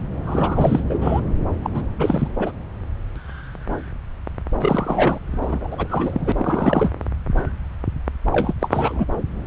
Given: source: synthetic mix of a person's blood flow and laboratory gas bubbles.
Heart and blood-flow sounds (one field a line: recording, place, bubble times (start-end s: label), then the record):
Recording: Doppler ultrasound of blood flow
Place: subclavian vein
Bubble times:
0.25-0.83 s: bubbles
0.89-1.21 s: bubbles
1.63-1.71 s: bubbles
1.74-1.82 s: bubbles
1.98-2.28 s: bubbles
2.35-2.52 s: bubbles
4.60-5.19 s: bubbles
5.41-5.68 s: bubbles
5.71-6.32 s: bubbles
6.38-6.93 s: bubbles
8.26-8.54 s: bubbles
8.59-9.06 s: bubbles
From the record:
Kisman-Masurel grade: 333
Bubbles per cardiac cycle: rolling drumbeat, 9 or more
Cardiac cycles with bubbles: 50 to 99%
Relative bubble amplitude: loud (0.450 to 0.775)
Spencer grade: 3 (all of the cardiac periods contain showers or single bubble signals, but not dominating or overriding the cardiac motion signals)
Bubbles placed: anywhere in the cardiac cycle